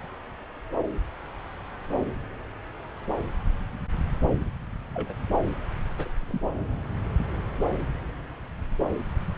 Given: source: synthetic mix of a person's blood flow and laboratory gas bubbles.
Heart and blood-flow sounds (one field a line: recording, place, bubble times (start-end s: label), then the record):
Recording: Doppler ultrasound of blood flow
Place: subclavian vein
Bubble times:
4.94-5.13 s: bubbles
5.98-6.10 s: bubbles
6.29-6.40 s: bubbles
From the record:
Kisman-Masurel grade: 111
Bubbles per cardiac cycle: 1 to 2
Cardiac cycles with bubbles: 1 to 10%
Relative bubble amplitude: barely perceptible (0.100 to 0.250)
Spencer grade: 1 (occasional bubble signal discernible with the cardiac motion signal, with majority of cardiac periods free of bubbles)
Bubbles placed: anywhere in the cardiac cycle